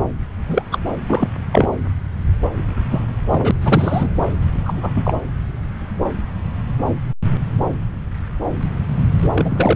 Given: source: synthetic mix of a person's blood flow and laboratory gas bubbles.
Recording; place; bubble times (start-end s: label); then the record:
Doppler ultrasound of blood flow; subclavian vein
0.48-0.62 s: bubbles
0.71-0.78 s: bubbles
1.08-1.28 s: bubbles
1.52-1.69 s: bubbles
2.90-3.06 s: bubbles
3.31-3.51 s: bubbles
3.61-4.08 s: bubbles
4.66-4.74 s: bubbles
4.76-5.14 s: bubbles
9.22-9.29 s: bubbles
9.34-9.76 s: bubbles
From the record:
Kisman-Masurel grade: 233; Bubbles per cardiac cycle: several, 3 to 8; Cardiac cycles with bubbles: 50 to 99%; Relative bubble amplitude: loud (0.450 to 0.775); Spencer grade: 3 (all of the cardiac periods contain showers or single bubble signals, but not dominating or overriding the cardiac motion signals); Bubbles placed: anywhere in the cardiac cycle